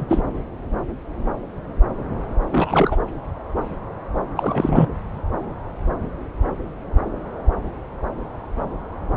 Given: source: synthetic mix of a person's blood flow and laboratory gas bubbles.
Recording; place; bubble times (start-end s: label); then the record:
Doppler ultrasound of blood flow; subclavian vein
0.00-0.05 s: bubbles
0.09-0.23 s: bubbles
2.52-2.96 s: bubbles
4.36-4.88 s: bubbles
From the record:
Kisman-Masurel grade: 222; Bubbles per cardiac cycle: several, 3 to 8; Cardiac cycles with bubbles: 10 to 50%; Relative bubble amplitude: moderate (0.250 to 0.450); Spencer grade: 2 (many but less than half of the cardiac periods contain bubble signals, singularly or in groups); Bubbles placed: anywhere in the cardiac cycle